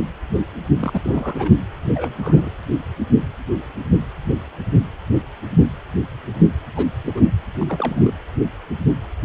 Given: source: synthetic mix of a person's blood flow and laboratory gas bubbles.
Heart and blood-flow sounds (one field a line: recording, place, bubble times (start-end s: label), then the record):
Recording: Doppler ultrasound of blood flow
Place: precordium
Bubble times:
0.80-1.52 s: bubbles
1.94-2.15 s: bubbles
2.17-2.50 s: bubbles
6.75-6.87 s: bubbles
7.06-7.30 s: bubbles
7.58-8.12 s: bubbles
From the record:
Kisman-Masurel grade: 221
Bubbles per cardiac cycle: several, 3 to 8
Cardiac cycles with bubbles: 10 to 50%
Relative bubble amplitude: barely perceptible (0.100 to 0.250)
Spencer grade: 2 (many but less than half of the cardiac periods contain bubble signals, singularly or in groups)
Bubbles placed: anywhere in the cardiac cycle